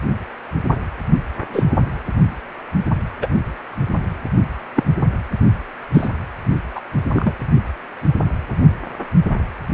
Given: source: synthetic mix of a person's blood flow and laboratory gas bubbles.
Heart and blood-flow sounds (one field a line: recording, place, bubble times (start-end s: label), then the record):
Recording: Doppler ultrasound of blood flow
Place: precordium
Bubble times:
1.52-1.64 s: bubbles
3.21-3.27 s: bubbles
4.75-4.83 s: bubbles
5.94-6.09 s: bubbles
6.75-6.80 s: bubbles
7.13-7.33 s: bubbles
From the record:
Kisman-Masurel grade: 123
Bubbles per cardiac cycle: 1 to 2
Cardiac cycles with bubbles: 10 to 50%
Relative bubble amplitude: loud (0.450 to 0.775)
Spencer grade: 2 (many but less than half of the cardiac periods contain bubble signals, singularly or in groups)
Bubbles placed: anywhere in the cardiac cycle